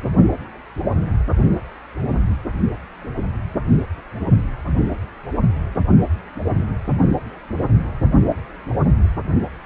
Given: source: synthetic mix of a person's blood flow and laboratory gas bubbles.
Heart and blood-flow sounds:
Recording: Doppler ultrasound of blood flow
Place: precordium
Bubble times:
no bubbles
From the record:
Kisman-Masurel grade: 000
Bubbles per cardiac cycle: 0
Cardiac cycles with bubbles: 0%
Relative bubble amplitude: no bubbles discernible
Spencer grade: 0 (complete lack of bubble signals)

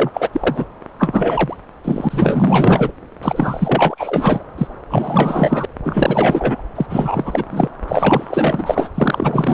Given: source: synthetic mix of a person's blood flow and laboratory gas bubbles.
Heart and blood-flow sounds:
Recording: Doppler ultrasound of blood flow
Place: subclavian vein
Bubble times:
0.00-0.10 s: bubbles
0.14-0.29 s: bubbles
0.32-0.66 s: bubbles
0.99-1.56 s: bubbles
1.84-2.92 s: bubbles
3.23-4.43 s: bubbles
4.58-4.67 s: bubbles
4.90-5.66 s: bubbles
5.83-6.63 s: bubbles
6.75-6.86 s: bubbles
6.89-7.44 s: bubbles
7.51-7.68 s: bubbles
7.88-8.89 s: bubbles
8.95-9.54 s: bubbles
From the record:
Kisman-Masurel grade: 444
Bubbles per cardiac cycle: continuous sound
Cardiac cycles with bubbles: 100%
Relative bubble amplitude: maximal (0.775 to 0.999)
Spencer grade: 4 (maximum detectable bubble signal sounding continuously throughout systole and diastole of every cardiac period, and overriding the amplitude of the normal cardiac signals)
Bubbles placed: anywhere in the cardiac cycle

